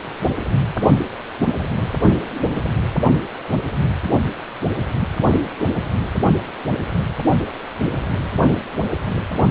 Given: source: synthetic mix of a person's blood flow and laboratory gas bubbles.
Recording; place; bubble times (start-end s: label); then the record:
Doppler ultrasound of blood flow; precordium
9.49-9.51 s: bubbles
From the record:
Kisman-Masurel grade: 122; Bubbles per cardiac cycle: 1 to 2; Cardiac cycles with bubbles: 10 to 50%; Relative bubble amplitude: moderate (0.250 to 0.450); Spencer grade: 2 (many but less than half of the cardiac periods contain bubble signals, singularly or in groups); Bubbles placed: anywhere in the cardiac cycle